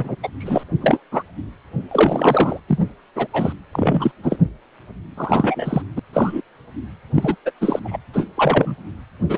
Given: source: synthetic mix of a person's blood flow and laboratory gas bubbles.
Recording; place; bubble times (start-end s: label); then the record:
Doppler ultrasound of blood flow; precordium
0.00-0.16 s: bubbles
0.23-0.28 s: bubbles
0.40-0.63 s: bubbles
0.81-1.00 s: bubbles
1.11-1.23 s: bubbles
1.91-2.60 s: bubbles
2.68-2.79 s: bubbles
3.15-3.27 s: bubbles
3.33-3.52 s: bubbles
3.72-4.11 s: bubbles
4.22-4.38 s: bubbles
5.17-5.82 s: bubbles
5.96-5.99 s: bubbles
6.13-6.41 s: bubbles
7.14-7.35 s: bubbles
7.45-7.51 s: bubbles
7.61-7.79 s: bubbles
7.84-7.97 s: bubbles
8.13-8.26 s: bubbles
8.37-8.75 s: bubbles
9.29-9.38 s: bubbles
From the record:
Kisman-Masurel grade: 243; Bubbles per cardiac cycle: several, 3 to 8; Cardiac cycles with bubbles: 100%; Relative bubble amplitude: loud (0.450 to 0.775); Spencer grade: 3 (all of the cardiac periods contain showers or single bubble signals, but not dominating or overriding the cardiac motion signals); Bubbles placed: anywhere in the cardiac cycle